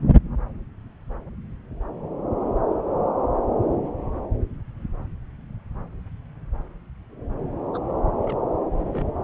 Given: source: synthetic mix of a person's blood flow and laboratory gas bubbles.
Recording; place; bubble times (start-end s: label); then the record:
Doppler ultrasound of blood flow; subclavian vein
7.74-7.78 s: bubbles
8.22-8.40 s: bubbles
8.78-9.12 s: bubbles
From the record:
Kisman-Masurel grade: 121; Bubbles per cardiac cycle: 1 to 2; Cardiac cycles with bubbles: 10 to 50%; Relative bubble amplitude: barely perceptible (0.100 to 0.250); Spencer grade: 2 (many but less than half of the cardiac periods contain bubble signals, singularly or in groups); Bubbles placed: anywhere in the cardiac cycle